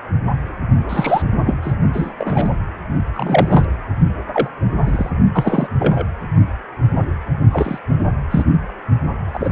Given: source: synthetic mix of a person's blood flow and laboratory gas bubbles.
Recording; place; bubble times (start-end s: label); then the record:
Doppler ultrasound of blood flow; precordium
0.89-1.22 s: bubbles
1.46-1.59 s: bubbles
1.62-1.73 s: bubbles
1.94-2.12 s: bubbles
2.19-2.50 s: bubbles
3.14-3.65 s: bubbles
4.33-4.50 s: bubbles
4.81-5.10 s: bubbles
5.33-5.67 s: bubbles
5.79-6.06 s: bubbles
7.51-7.78 s: bubbles
8.30-8.43 s: bubbles
8.52-8.57 s: bubbles
9.33-9.51 s: bubbles
From the record:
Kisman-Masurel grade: 233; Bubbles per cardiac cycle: several, 3 to 8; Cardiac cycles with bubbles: 50 to 99%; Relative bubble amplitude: loud (0.450 to 0.775); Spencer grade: 3 (all of the cardiac periods contain showers or single bubble signals, but not dominating or overriding the cardiac motion signals); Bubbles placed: only in the low amplitude regions of the cardiac cycle